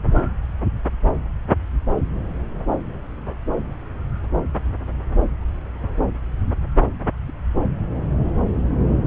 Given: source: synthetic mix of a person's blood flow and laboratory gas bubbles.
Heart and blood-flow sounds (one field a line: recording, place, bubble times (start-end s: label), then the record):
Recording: Doppler ultrasound of blood flow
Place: subclavian vein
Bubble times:
no bubbles
From the record:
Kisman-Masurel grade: 000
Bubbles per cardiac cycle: 0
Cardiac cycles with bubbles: 0%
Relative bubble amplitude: no bubbles discernible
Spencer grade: 0 (complete lack of bubble signals)